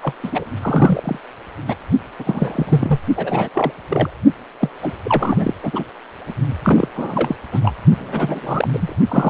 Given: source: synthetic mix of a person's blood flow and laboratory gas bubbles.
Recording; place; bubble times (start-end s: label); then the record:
Doppler ultrasound of blood flow; precordium
0.02-0.14 s: bubbles
0.22-0.51 s: bubbles
0.61-1.19 s: bubbles
1.67-1.74 s: bubbles
2.19-3.00 s: bubbles
3.16-3.48 s: bubbles
3.53-3.72 s: bubbles
3.88-4.11 s: bubbles
4.61-4.70 s: bubbles
4.82-4.93 s: bubbles
5.03-5.54 s: bubbles
5.63-5.84 s: bubbles
6.27-6.33 s: bubbles
6.64-6.89 s: bubbles
6.95-7.36 s: bubbles
7.52-7.61 s: bubbles
7.64-7.72 s: bubbles
7.99-8.96 s: bubbles
9.08-9.30 s: bubbles
From the record:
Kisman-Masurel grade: 342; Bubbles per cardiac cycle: rolling drumbeat, 9 or more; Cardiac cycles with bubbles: 100%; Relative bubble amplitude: moderate (0.250 to 0.450); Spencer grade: 3 (all of the cardiac periods contain showers or single bubble signals, but not dominating or overriding the cardiac motion signals); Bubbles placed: only in the low amplitude regions of the cardiac cycle